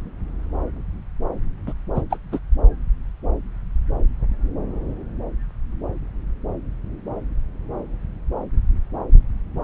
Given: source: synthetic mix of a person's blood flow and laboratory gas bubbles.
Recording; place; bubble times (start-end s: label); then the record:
Doppler ultrasound of blood flow; subclavian vein
1.67-1.73 s: bubbles
1.96-2.02 s: bubbles
2.10-2.17 s: bubbles
2.31-2.39 s: bubbles
From the record:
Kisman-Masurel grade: 212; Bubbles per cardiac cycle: several, 3 to 8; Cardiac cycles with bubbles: 1 to 10%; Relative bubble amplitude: moderate (0.250 to 0.450); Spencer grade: 1 (occasional bubble signal discernible with the cardiac motion signal, with majority of cardiac periods free of bubbles); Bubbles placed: anywhere in the cardiac cycle